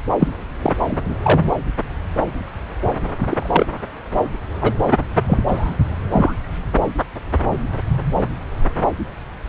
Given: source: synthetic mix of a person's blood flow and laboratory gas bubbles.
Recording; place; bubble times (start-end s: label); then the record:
Doppler ultrasound of blood flow; subclavian vein
0.19-0.28 s: bubbles
0.62-0.73 s: bubbles
0.88-1.15 s: bubbles
1.23-1.40 s: bubbles
3.29-3.66 s: bubbles
4.60-4.73 s: bubbles
5.26-5.38 s: bubbles
5.47-5.74 s: bubbles
6.12-6.33 s: bubbles
From the record:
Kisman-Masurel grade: 123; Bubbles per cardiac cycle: 1 to 2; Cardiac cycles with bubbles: 10 to 50%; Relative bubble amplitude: loud (0.450 to 0.775); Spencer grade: 2 (many but less than half of the cardiac periods contain bubble signals, singularly or in groups); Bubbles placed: anywhere in the cardiac cycle